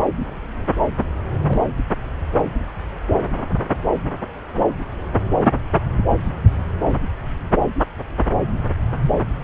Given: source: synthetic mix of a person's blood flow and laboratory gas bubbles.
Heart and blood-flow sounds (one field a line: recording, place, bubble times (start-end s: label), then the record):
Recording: Doppler ultrasound of blood flow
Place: subclavian vein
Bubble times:
1.46-1.65 s: bubbles
From the record:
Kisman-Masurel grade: 111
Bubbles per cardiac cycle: 1 to 2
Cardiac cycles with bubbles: 1 to 10%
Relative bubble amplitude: barely perceptible (0.100 to 0.250)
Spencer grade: 1 (occasional bubble signal discernible with the cardiac motion signal, with majority of cardiac periods free of bubbles)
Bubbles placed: anywhere in the cardiac cycle